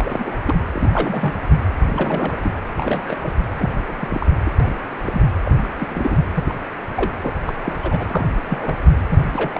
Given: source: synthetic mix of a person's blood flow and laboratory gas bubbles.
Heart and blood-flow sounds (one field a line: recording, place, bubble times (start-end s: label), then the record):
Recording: Doppler ultrasound of blood flow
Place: precordium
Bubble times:
0.00-0.37 s: bubbles
0.47-0.55 s: bubbles
0.74-1.38 s: bubbles
1.91-2.37 s: bubbles
2.42-2.52 s: bubbles
2.77-3.17 s: bubbles
3.22-3.33 s: bubbles
3.54-3.70 s: bubbles
3.88-3.96 s: bubbles
4.00-4.27 s: bubbles
4.45-4.50 s: bubbles
4.60-4.70 s: bubbles
5.05-5.23 s: bubbles
5.45-5.52 s: bubbles
5.63-5.68 s: bubbles
5.79-5.88 s: bubbles
5.92-6.17 s: bubbles
6.35-6.54 s: bubbles
6.96-7.11 s: bubbles
7.22-7.32 s: bubbles
7.46-7.53 s: bubbles
7.65-7.77 s: bubbles
7.82-8.06 s: bubbles
8.10-8.26 s: bubbles
8.46-8.76 s: bubbles
9.08-9.22 s: bubbles
9.27-9.51 s: bubbles
9.54-9.60 s: bubbles
From the record:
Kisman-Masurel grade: 242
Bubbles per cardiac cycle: several, 3 to 8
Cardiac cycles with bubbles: 100%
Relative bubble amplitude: moderate (0.250 to 0.450)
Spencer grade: 3 (all of the cardiac periods contain showers or single bubble signals, but not dominating or overriding the cardiac motion signals)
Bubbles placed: anywhere in the cardiac cycle